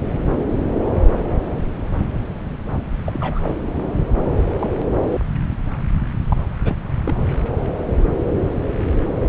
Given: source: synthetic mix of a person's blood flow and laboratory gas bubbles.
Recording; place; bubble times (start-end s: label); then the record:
Doppler ultrasound of blood flow; subclavian vein
3.06-3.58 s: bubbles
4.59-4.70 s: bubbles
4.98-5.04 s: bubbles
6.29-6.37 s: bubbles
6.64-6.75 s: bubbles
7.05-7.15 s: bubbles
From the record:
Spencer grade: 2 (many but less than half of the cardiac periods contain bubble signals, singularly or in groups); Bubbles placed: anywhere in the cardiac cycle